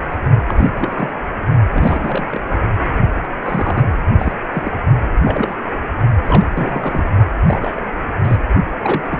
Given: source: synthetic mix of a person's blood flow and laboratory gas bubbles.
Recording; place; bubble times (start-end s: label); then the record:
Doppler ultrasound of blood flow; precordium
0.09-0.17 s: bubbles
0.48-0.71 s: bubbles
0.77-1.15 s: bubbles
1.74-2.42 s: bubbles
3.23-3.28 s: bubbles
3.44-3.87 s: bubbles
4.18-4.32 s: bubbles
4.53-4.72 s: bubbles
5.24-5.56 s: bubbles
6.25-6.46 s: bubbles
6.52-7.04 s: bubbles
7.47-7.82 s: bubbles
8.24-8.37 s: bubbles
8.83-9.06 s: bubbles
9.09-9.20 s: bubbles
From the record:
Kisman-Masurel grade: 242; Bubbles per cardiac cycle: several, 3 to 8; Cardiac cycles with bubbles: 100%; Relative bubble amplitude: moderate (0.250 to 0.450); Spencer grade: 3 (all of the cardiac periods contain showers or single bubble signals, but not dominating or overriding the cardiac motion signals); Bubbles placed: only in the low amplitude regions of the cardiac cycle